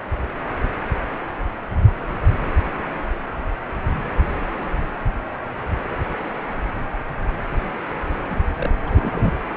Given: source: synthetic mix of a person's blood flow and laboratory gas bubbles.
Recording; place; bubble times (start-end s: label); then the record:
Doppler ultrasound of blood flow; precordium
8.30-8.40 s: bubbles
8.57-8.73 s: bubbles
8.86-9.34 s: bubbles
From the record:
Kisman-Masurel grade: 212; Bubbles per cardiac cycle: several, 3 to 8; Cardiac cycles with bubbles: 1 to 10%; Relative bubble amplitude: moderate (0.250 to 0.450); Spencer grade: 1 (occasional bubble signal discernible with the cardiac motion signal, with majority of cardiac periods free of bubbles); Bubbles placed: anywhere in the cardiac cycle